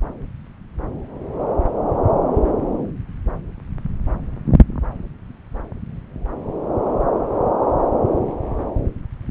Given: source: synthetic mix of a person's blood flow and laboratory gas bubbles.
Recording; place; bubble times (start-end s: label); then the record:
Doppler ultrasound of blood flow; subclavian vein
no bubbles
From the record:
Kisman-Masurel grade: 000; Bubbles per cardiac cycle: 0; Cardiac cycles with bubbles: 0%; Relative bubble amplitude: no bubbles discernible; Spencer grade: 0 (complete lack of bubble signals)